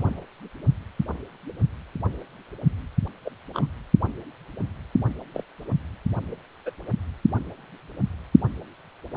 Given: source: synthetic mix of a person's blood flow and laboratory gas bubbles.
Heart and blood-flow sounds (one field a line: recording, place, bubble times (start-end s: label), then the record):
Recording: Doppler ultrasound of blood flow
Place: precordium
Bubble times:
0.00-0.20 s: bubbles
3.25-3.30 s: bubbles
3.54-3.66 s: bubbles
5.33-5.44 s: bubbles
6.65-6.71 s: bubbles
From the record:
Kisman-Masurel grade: 121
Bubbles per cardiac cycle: 1 to 2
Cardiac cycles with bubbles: 10 to 50%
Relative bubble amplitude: barely perceptible (0.100 to 0.250)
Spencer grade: 2 (many but less than half of the cardiac periods contain bubble signals, singularly or in groups)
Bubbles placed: anywhere in the cardiac cycle